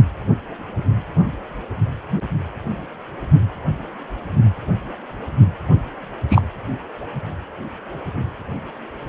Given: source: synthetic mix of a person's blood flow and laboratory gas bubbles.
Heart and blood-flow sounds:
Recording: Doppler ultrasound of blood flow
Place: precordium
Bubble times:
6.29-6.42 s: bubbles
From the record:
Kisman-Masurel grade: 123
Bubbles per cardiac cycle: 1 to 2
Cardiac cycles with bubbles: 10 to 50%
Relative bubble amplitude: loud (0.450 to 0.775)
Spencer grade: 2 (many but less than half of the cardiac periods contain bubble signals, singularly or in groups)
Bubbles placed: only in the low amplitude regions of the cardiac cycle

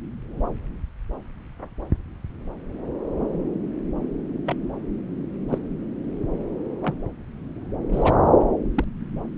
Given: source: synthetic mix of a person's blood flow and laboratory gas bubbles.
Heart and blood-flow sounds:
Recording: Doppler ultrasound of blood flow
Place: subclavian vein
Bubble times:
4.46-4.55 s: bubbles
5.49-5.58 s: bubbles
6.82-6.95 s: bubbles
7.92-8.17 s: bubbles
8.74-8.84 s: bubbles
From the record:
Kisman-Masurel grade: 121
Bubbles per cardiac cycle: 1 to 2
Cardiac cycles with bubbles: 10 to 50%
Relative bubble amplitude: barely perceptible (0.100 to 0.250)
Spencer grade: 2 (many but less than half of the cardiac periods contain bubble signals, singularly or in groups)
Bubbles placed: anywhere in the cardiac cycle

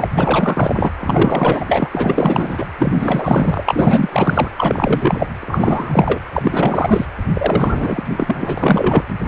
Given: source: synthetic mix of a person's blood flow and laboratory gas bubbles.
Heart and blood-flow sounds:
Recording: Doppler ultrasound of blood flow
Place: precordium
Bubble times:
0.00-0.08 s: bubbles
0.15-0.91 s: bubbles
1.00-1.88 s: bubbles
1.91-2.67 s: bubbles
2.78-4.50 s: bubbles
4.56-5.26 s: bubbles
5.41-6.21 s: bubbles
6.33-7.05 s: bubbles
7.33-9.05 s: bubbles
From the record:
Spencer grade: 4 (maximum detectable bubble signal sounding continuously throughout systole and diastole of every cardiac period, and overriding the amplitude of the normal cardiac signals)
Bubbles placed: anywhere in the cardiac cycle

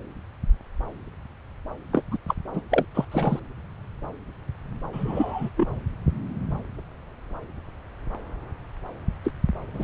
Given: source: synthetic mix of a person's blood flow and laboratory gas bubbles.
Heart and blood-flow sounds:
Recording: Doppler ultrasound of blood flow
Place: subclavian vein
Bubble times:
1.93-2.02 s: bubbles
2.12-2.18 s: bubbles
2.28-2.34 s: bubbles
2.53-2.62 s: bubbles
2.70-2.85 s: bubbles
2.94-3.05 s: bubbles
3.11-3.40 s: bubbles
4.92-5.50 s: bubbles
5.57-5.81 s: bubbles
9.24-9.31 s: bubbles
9.73-9.84 s: bubbles
From the record:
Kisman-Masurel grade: 222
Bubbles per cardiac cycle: several, 3 to 8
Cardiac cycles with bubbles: 10 to 50%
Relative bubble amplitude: moderate (0.250 to 0.450)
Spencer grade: 2 (many but less than half of the cardiac periods contain bubble signals, singularly or in groups)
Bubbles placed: anywhere in the cardiac cycle

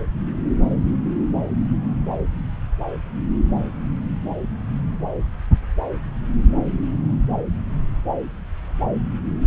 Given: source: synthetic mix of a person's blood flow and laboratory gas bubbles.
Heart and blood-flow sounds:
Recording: Doppler ultrasound of blood flow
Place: subclavian vein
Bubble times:
no bubbles
From the record:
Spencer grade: 0 (complete lack of bubble signals)

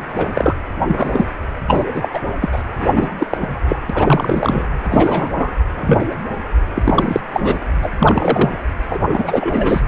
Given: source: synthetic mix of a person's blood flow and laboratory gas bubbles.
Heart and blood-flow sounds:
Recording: Doppler ultrasound of blood flow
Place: precordium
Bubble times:
0.09-0.56 s: bubbles
0.88-1.25 s: bubbles
1.67-1.85 s: bubbles
1.94-2.08 s: bubbles
2.13-2.19 s: bubbles
2.41-2.49 s: bubbles
2.52-2.62 s: bubbles
2.78-2.90 s: bubbles
2.95-3.08 s: bubbles
3.17-3.27 s: bubbles
3.30-3.38 s: bubbles
3.40-3.61 s: bubbles
3.68-3.76 s: bubbles
3.89-4.66 s: bubbles
4.90-5.49 s: bubbles
5.78-6.05 s: bubbles
6.75-7.20 s: bubbles
7.33-7.58 s: bubbles
7.82-7.91 s: bubbles
7.98-8.58 s: bubbles
8.88-9.02 s: bubbles
9.12-9.82 s: bubbles
From the record:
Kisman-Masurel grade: 243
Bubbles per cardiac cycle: several, 3 to 8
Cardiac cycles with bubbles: 100%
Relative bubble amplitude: loud (0.450 to 0.775)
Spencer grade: 3 (all of the cardiac periods contain showers or single bubble signals, but not dominating or overriding the cardiac motion signals)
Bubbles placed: anywhere in the cardiac cycle

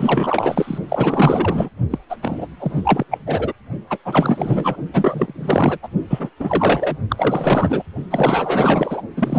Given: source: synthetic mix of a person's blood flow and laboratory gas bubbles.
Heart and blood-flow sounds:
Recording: Doppler ultrasound of blood flow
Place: precordium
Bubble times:
0.00-0.78 s: bubbles
0.89-1.69 s: bubbles
1.90-1.98 s: bubbles
2.09-2.17 s: bubbles
2.21-2.48 s: bubbles
2.59-3.04 s: bubbles
3.10-3.18 s: bubbles
3.26-3.53 s: bubbles
3.89-3.99 s: bubbles
4.04-4.76 s: bubbles
4.92-5.79 s: bubbles
5.83-5.88 s: bubbles
6.09-6.29 s: bubbles
6.39-6.97 s: bubbles
7.09-7.84 s: bubbles
8.10-9.02 s: bubbles
9.16-9.39 s: bubbles
From the record:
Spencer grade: 4 (maximum detectable bubble signal sounding continuously throughout systole and diastole of every cardiac period, and overriding the amplitude of the normal cardiac signals)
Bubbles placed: only in the low amplitude regions of the cardiac cycle

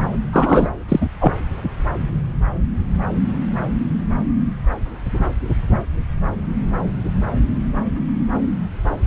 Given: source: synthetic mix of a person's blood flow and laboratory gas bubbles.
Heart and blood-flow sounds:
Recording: Doppler ultrasound of blood flow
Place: subclavian vein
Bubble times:
0.33-0.70 s: bubbles
0.88-1.06 s: bubbles
1.20-1.33 s: bubbles
From the record:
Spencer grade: 2 (many but less than half of the cardiac periods contain bubble signals, singularly or in groups)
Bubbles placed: anywhere in the cardiac cycle

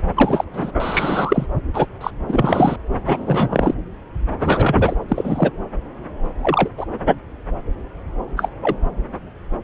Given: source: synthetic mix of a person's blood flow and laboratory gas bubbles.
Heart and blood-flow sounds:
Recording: Doppler ultrasound of blood flow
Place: subclavian vein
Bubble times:
0.15-0.44 s: bubbles
0.53-0.71 s: bubbles
0.80-1.47 s: bubbles
1.73-1.86 s: bubbles
2.01-2.10 s: bubbles
2.28-2.77 s: bubbles
3.05-3.74 s: bubbles
4.39-4.96 s: bubbles
5.08-5.50 s: bubbles
6.42-6.69 s: bubbles
6.77-6.85 s: bubbles
8.37-8.49 s: bubbles
8.62-8.77 s: bubbles
From the record:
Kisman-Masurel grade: 233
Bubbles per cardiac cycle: several, 3 to 8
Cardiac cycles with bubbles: 50 to 99%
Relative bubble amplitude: loud (0.450 to 0.775)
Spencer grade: 3 (all of the cardiac periods contain showers or single bubble signals, but not dominating or overriding the cardiac motion signals)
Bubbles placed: anywhere in the cardiac cycle

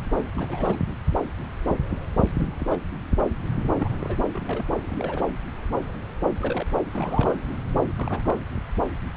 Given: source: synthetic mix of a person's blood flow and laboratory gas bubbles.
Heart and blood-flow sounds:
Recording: Doppler ultrasound of blood flow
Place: subclavian vein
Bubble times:
0.36-0.76 s: bubbles
2.38-2.76 s: bubbles
3.79-3.88 s: bubbles
3.91-4.17 s: bubbles
4.33-4.71 s: bubbles
4.87-5.24 s: bubbles
6.39-6.67 s: bubbles
6.90-7.37 s: bubbles
7.97-8.41 s: bubbles
From the record:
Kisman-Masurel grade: 221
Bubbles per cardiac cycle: several, 3 to 8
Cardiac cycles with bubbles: 10 to 50%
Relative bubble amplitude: barely perceptible (0.100 to 0.250)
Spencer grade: 2 (many but less than half of the cardiac periods contain bubble signals, singularly or in groups)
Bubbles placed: anywhere in the cardiac cycle

